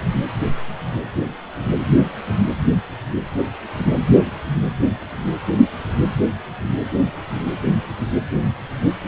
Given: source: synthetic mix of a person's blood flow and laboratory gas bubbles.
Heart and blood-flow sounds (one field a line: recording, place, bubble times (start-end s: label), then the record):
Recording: Doppler ultrasound of blood flow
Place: precordium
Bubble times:
4.25-4.30 s: bubbles
From the record:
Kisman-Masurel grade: 111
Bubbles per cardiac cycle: 1 to 2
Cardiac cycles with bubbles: 1 to 10%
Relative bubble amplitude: barely perceptible (0.100 to 0.250)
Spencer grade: 1 (occasional bubble signal discernible with the cardiac motion signal, with majority of cardiac periods free of bubbles)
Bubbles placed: anywhere in the cardiac cycle